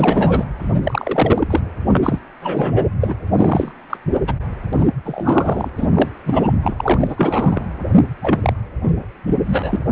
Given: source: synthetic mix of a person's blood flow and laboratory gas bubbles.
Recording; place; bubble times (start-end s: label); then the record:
Doppler ultrasound of blood flow; precordium
0.00-0.45 s: bubbles
0.58-0.74 s: bubbles
0.83-1.47 s: bubbles
1.50-1.60 s: bubbles
1.90-2.19 s: bubbles
2.42-2.87 s: bubbles
3.00-3.14 s: bubbles
3.37-3.72 s: bubbles
3.90-3.98 s: bubbles
4.27-4.34 s: bubbles
4.73-4.87 s: bubbles
5.05-5.70 s: bubbles
5.77-5.88 s: bubbles
5.94-6.09 s: bubbles
6.26-6.54 s: bubbles
6.62-7.65 s: bubbles
8.22-8.53 s: bubbles
8.83-9.06 s: bubbles
9.26-9.37 s: bubbles
9.47-9.77 s: bubbles
From the record:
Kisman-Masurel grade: 342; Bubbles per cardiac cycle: rolling drumbeat, 9 or more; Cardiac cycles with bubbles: 100%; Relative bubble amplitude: moderate (0.250 to 0.450); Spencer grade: 3 (all of the cardiac periods contain showers or single bubble signals, but not dominating or overriding the cardiac motion signals); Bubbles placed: anywhere in the cardiac cycle